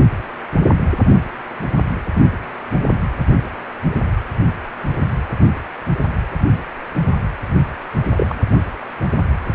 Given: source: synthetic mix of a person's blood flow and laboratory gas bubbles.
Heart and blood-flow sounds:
Doppler ultrasound of blood flow; precordium
8.15-8.36 s: bubbles
From the record:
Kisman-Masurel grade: 112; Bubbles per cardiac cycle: 1 to 2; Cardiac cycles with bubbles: 1 to 10%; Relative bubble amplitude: moderate (0.250 to 0.450); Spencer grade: 1 (occasional bubble signal discernible with the cardiac motion signal, with majority of cardiac periods free of bubbles); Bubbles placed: anywhere in the cardiac cycle

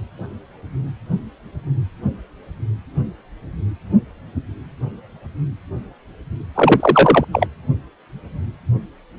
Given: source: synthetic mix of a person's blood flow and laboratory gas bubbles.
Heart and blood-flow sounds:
Doppler ultrasound of blood flow; precordium
6.54-7.25 s: bubbles
7.32-7.47 s: bubbles
From the record:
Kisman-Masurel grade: 213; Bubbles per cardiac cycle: several, 3 to 8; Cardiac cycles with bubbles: 1 to 10%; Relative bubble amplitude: loud (0.450 to 0.775); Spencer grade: 1 (occasional bubble signal discernible with the cardiac motion signal, with majority of cardiac periods free of bubbles); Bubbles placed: anywhere in the cardiac cycle

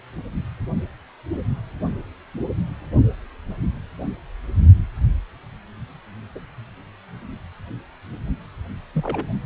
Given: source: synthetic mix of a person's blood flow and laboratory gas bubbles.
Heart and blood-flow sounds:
Doppler ultrasound of blood flow; precordium
6.35-6.39 s: bubbles
8.94-9.38 s: bubbles
From the record:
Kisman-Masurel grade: 121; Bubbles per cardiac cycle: 1 to 2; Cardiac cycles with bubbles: 10 to 50%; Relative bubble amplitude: barely perceptible (0.100 to 0.250); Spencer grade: 2 (many but less than half of the cardiac periods contain bubble signals, singularly or in groups); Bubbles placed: only in the low amplitude regions of the cardiac cycle

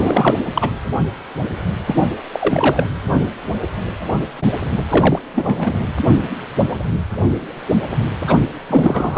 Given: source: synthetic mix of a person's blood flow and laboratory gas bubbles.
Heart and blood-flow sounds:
Doppler ultrasound of blood flow; precordium
0.00-0.35 s: bubbles
0.55-0.70 s: bubbles
1.87-2.10 s: bubbles
2.33-2.85 s: bubbles
4.88-5.20 s: bubbles
5.34-5.78 s: bubbles
8.27-8.44 s: bubbles
8.69-9.18 s: bubbles
From the record:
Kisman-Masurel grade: 333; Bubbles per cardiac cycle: rolling drumbeat, 9 or more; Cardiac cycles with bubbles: 50 to 99%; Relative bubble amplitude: loud (0.450 to 0.775); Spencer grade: 3 (all of the cardiac periods contain showers or single bubble signals, but not dominating or overriding the cardiac motion signals); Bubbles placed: anywhere in the cardiac cycle

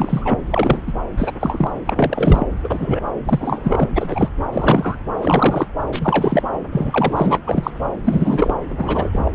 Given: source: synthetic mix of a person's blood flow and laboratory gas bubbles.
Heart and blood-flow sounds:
Doppler ultrasound of blood flow; subclavian vein
0.00-0.39 s: bubbles
0.52-0.81 s: bubbles
0.86-0.93 s: bubbles
1.17-1.32 s: bubbles
1.41-1.70 s: bubbles
1.86-2.46 s: bubbles
2.63-3.00 s: bubbles
3.25-3.89 s: bubbles
3.95-4.29 s: bubbles
4.52-4.96 s: bubbles
5.21-5.67 s: bubbles
5.92-6.42 s: bubbles
6.72-7.39 s: bubbles
7.46-7.71 s: bubbles
8.04-8.56 s: bubbles
8.68-9.09 s: bubbles
9.12-9.29 s: bubbles
From the record:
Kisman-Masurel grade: 232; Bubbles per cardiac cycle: several, 3 to 8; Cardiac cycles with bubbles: 50 to 99%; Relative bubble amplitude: moderate (0.250 to 0.450); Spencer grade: 3 (all of the cardiac periods contain showers or single bubble signals, but not dominating or overriding the cardiac motion signals); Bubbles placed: anywhere in the cardiac cycle

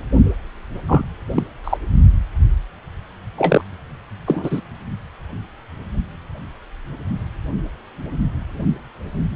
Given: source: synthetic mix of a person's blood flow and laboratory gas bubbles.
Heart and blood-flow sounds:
Doppler ultrasound of blood flow; precordium
0.88-1.02 s: bubbles
1.34-1.43 s: bubbles
1.64-1.77 s: bubbles
3.38-3.61 s: bubbles
4.26-4.61 s: bubbles
From the record:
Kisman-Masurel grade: 223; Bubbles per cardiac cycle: several, 3 to 8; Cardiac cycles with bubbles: 10 to 50%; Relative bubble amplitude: loud (0.450 to 0.775); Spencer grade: 2 (many but less than half of the cardiac periods contain bubble signals, singularly or in groups); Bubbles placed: only in the low amplitude regions of the cardiac cycle

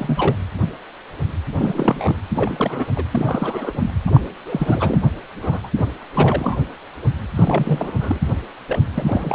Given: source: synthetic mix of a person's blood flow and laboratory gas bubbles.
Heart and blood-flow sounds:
Doppler ultrasound of blood flow; precordium
0.00-0.36 s: bubbles
1.55-2.16 s: bubbles
2.35-2.88 s: bubbles
2.96-3.04 s: bubbles
3.11-3.71 s: bubbles
3.75-3.91 s: bubbles
4.06-4.21 s: bubbles
4.46-4.99 s: bubbles
5.42-5.60 s: bubbles
5.63-5.67 s: bubbles
5.76-5.87 s: bubbles
6.12-6.57 s: bubbles
7.34-8.19 s: bubbles
8.67-8.78 s: bubbles
8.94-9.35 s: bubbles
From the record:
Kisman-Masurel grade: 332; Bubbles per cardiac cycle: rolling drumbeat, 9 or more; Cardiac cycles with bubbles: 50 to 99%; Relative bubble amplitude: moderate (0.250 to 0.450); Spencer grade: 3 (all of the cardiac periods contain showers or single bubble signals, but not dominating or overriding the cardiac motion signals); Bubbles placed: anywhere in the cardiac cycle

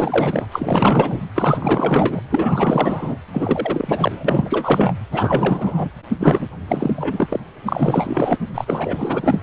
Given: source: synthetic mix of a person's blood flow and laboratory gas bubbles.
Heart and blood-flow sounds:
Doppler ultrasound of blood flow; precordium
0.00-0.47 s: bubbles
0.52-1.21 s: bubbles
1.35-2.21 s: bubbles
2.31-3.16 s: bubbles
3.33-4.95 s: bubbles
5.11-5.90 s: bubbles
6.20-6.48 s: bubbles
6.68-7.40 s: bubbles
7.66-8.38 s: bubbles
8.54-9.39 s: bubbles
From the record:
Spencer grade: 4 (maximum detectable bubble signal sounding continuously throughout systole and diastole of every cardiac period, and overriding the amplitude of the normal cardiac signals); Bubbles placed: anywhere in the cardiac cycle

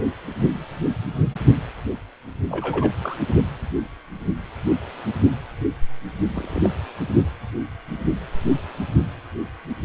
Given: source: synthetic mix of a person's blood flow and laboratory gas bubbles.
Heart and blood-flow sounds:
Doppler ultrasound of blood flow; precordium
2.50-2.92 s: bubbles
3.03-3.17 s: bubbles
6.34-6.60 s: bubbles
6.63-6.70 s: bubbles
From the record:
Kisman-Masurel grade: 112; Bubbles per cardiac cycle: 1 to 2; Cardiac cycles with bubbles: 1 to 10%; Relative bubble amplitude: moderate (0.250 to 0.450); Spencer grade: 1 (occasional bubble signal discernible with the cardiac motion signal, with majority of cardiac periods free of bubbles); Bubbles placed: only in the low amplitude regions of the cardiac cycle

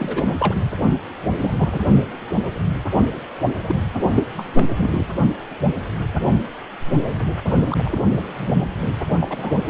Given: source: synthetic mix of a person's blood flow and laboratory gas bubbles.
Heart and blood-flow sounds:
Doppler ultrasound of blood flow; precordium
0.00-0.70 s: bubbles
1.40-1.79 s: bubbles
3.67-3.75 s: bubbles
4.10-4.23 s: bubbles
4.37-4.46 s: bubbles
4.55-4.68 s: bubbles
4.77-5.06 s: bubbles
7.68-7.97 s: bubbles
8.11-8.20 s: bubbles
8.35-8.68 s: bubbles
9.21-9.53 s: bubbles
9.67-9.70 s: bubbles
From the record:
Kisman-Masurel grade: 222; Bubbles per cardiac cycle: several, 3 to 8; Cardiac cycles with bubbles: 10 to 50%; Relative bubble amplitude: moderate (0.250 to 0.450); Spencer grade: 2 (many but less than half of the cardiac periods contain bubble signals, singularly or in groups); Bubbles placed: only in the low amplitude regions of the cardiac cycle

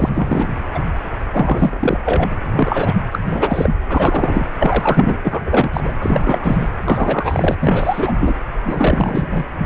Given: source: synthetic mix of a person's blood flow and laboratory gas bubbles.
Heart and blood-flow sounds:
Doppler ultrasound of blood flow; precordium
0.00-0.10 s: bubbles
0.14-0.48 s: bubbles
0.74-0.79 s: bubbles
1.32-1.98 s: bubbles
2.04-2.29 s: bubbles
2.32-2.37 s: bubbles
2.56-2.95 s: bubbles
3.12-3.19 s: bubbles
3.28-3.75 s: bubbles
3.89-4.47 s: bubbles
4.58-5.17 s: bubbles
5.23-5.71 s: bubbles
5.73-5.92 s: bubbles
5.99-6.68 s: bubbles
6.84-7.55 s: bubbles
7.59-8.14 s: bubbles
8.21-8.33 s: bubbles
8.64-9.46 s: bubbles
9.59-9.66 s: bubbles
From the record:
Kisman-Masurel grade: 343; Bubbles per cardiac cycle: rolling drumbeat, 9 or more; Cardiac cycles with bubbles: 100%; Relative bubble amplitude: loud (0.450 to 0.775); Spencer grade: 3 (all of the cardiac periods contain showers or single bubble signals, but not dominating or overriding the cardiac motion signals); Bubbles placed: anywhere in the cardiac cycle

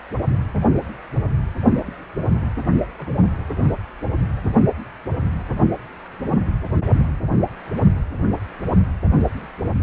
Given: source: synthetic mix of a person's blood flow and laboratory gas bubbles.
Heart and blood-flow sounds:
Doppler ultrasound of blood flow; precordium
2.98-3.15 s: bubbles
From the record:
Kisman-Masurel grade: 121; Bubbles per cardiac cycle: 1 to 2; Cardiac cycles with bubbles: 10 to 50%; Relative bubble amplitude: barely perceptible (0.100 to 0.250); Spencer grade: 2 (many but less than half of the cardiac periods contain bubble signals, singularly or in groups); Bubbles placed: only in the low amplitude regions of the cardiac cycle

